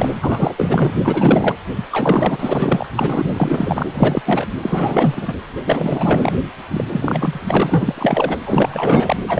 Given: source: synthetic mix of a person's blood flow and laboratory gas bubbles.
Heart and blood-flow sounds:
Doppler ultrasound of blood flow; precordium
0.00-0.18 s: bubbles
0.22-0.94 s: bubbles
1.04-1.56 s: bubbles
1.91-2.86 s: bubbles
2.95-3.83 s: bubbles
3.90-4.22 s: bubbles
4.25-4.48 s: bubbles
4.62-5.35 s: bubbles
5.66-6.39 s: bubbles
6.69-6.83 s: bubbles
6.92-7.40 s: bubbles
7.48-8.38 s: bubbles
8.46-9.17 s: bubbles
9.28-9.40 s: bubbles
From the record:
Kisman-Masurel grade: 444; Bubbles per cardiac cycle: continuous sound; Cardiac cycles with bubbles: 100%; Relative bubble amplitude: maximal (0.775 to 0.999); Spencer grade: 4 (maximum detectable bubble signal sounding continuously throughout systole and diastole of every cardiac period, and overriding the amplitude of the normal cardiac signals); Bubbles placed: anywhere in the cardiac cycle

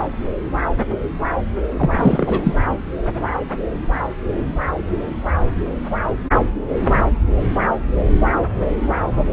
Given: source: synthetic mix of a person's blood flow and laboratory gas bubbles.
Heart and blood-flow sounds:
Doppler ultrasound of blood flow; subclavian vein
1.79-1.91 s: bubbles
1.94-2.54 s: bubbles
From the record:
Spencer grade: 1 (occasional bubble signal discernible with the cardiac motion signal, with majority of cardiac periods free of bubbles); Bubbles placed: anywhere in the cardiac cycle

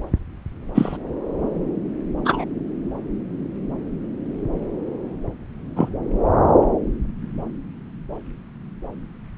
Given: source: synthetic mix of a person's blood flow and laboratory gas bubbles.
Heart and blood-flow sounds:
Doppler ultrasound of blood flow; subclavian vein
0.74-0.97 s: bubbles
2.25-2.45 s: bubbles
5.76-5.89 s: bubbles
From the record:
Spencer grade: 2 (many but less than half of the cardiac periods contain bubble signals, singularly or in groups); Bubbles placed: anywhere in the cardiac cycle

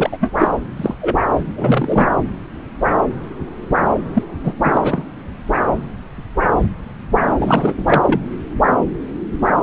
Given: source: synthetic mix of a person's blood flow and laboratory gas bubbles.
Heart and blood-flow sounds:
Doppler ultrasound of blood flow; subclavian vein
0.00-0.17 s: bubbles
0.20-0.33 s: bubbles
0.38-0.48 s: bubbles
0.76-0.94 s: bubbles
1.01-1.16 s: bubbles
1.44-2.07 s: bubbles
4.13-4.23 s: bubbles
4.43-4.53 s: bubbles
4.64-5.03 s: bubbles
7.38-7.73 s: bubbles
7.77-8.20 s: bubbles
From the record:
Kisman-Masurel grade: 223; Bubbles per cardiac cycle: several, 3 to 8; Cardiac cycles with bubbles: 10 to 50%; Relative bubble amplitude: loud (0.450 to 0.775); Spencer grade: 2 (many but less than half of the cardiac periods contain bubble signals, singularly or in groups); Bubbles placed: anywhere in the cardiac cycle

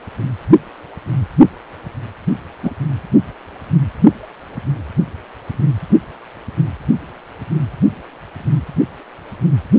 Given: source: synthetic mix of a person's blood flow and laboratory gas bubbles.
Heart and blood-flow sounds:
Doppler ultrasound of blood flow; precordium
2.62-2.71 s: bubbles
From the record:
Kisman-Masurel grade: 113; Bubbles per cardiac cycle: 1 to 2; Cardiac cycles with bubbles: 1 to 10%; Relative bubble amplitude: loud (0.450 to 0.775); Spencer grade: 1 (occasional bubble signal discernible with the cardiac motion signal, with majority of cardiac periods free of bubbles); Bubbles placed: only in the low amplitude regions of the cardiac cycle

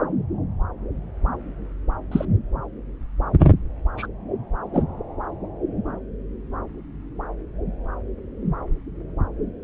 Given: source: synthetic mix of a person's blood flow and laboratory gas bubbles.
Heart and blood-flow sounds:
Doppler ultrasound of blood flow; subclavian vein
2.11-2.25 s: bubbles
3.97-4.06 s: bubbles
4.73-4.83 s: bubbles
From the record:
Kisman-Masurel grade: 123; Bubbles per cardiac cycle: 1 to 2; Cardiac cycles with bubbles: 10 to 50%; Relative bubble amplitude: loud (0.450 to 0.775); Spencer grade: 2 (many but less than half of the cardiac periods contain bubble signals, singularly or in groups); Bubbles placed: anywhere in the cardiac cycle

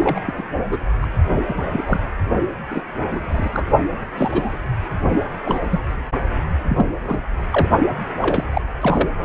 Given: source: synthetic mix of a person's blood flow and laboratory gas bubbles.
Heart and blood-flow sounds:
Doppler ultrasound of blood flow; precordium
0.00-0.22 s: bubbles
0.26-0.33 s: bubbles
0.37-0.43 s: bubbles
0.71-0.79 s: bubbles
1.01-1.06 s: bubbles
1.47-1.82 s: bubbles
1.85-2.01 s: bubbles
2.70-2.83 s: bubbles
3.12-3.49 s: bubbles
3.53-3.64 s: bubbles
4.17-4.58 s: bubbles
5.45-5.60 s: bubbles
5.71-5.80 s: bubbles
6.68-6.86 s: bubbles
7.04-7.21 s: bubbles
7.50-7.69 s: bubbles
8.22-8.44 s: bubbles
8.53-8.62 s: bubbles
8.80-9.09 s: bubbles
From the record:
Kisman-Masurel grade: 232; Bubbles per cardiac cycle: several, 3 to 8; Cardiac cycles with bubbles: 50 to 99%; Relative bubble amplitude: moderate (0.250 to 0.450); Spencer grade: 3 (all of the cardiac periods contain showers or single bubble signals, but not dominating or overriding the cardiac motion signals); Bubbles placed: only in the low amplitude regions of the cardiac cycle

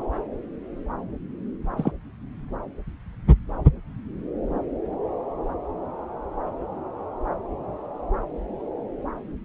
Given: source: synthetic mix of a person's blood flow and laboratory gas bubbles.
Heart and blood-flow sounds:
Doppler ultrasound of blood flow; subclavian vein
1.77-1.92 s: bubbles
From the record:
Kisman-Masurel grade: 122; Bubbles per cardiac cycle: 1 to 2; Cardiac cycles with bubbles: 10 to 50%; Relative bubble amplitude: moderate (0.250 to 0.450); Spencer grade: 2 (many but less than half of the cardiac periods contain bubble signals, singularly or in groups); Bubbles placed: anywhere in the cardiac cycle

